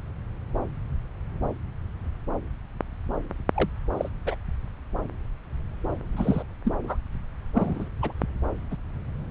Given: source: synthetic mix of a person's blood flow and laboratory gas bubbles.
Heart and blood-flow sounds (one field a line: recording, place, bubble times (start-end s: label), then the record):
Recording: Doppler ultrasound of blood flow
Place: subclavian vein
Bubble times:
3.54-3.69 s: bubbles
3.97-4.09 s: bubbles
4.26-4.35 s: bubbles
6.12-6.44 s: bubbles
6.64-6.74 s: bubbles
6.83-6.97 s: bubbles
7.53-7.89 s: bubbles
8.02-8.12 s: bubbles
8.71-8.77 s: bubbles
From the record:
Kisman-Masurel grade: 221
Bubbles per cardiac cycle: several, 3 to 8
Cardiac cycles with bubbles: 10 to 50%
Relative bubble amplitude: barely perceptible (0.100 to 0.250)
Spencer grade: 2 (many but less than half of the cardiac periods contain bubble signals, singularly or in groups)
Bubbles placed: anywhere in the cardiac cycle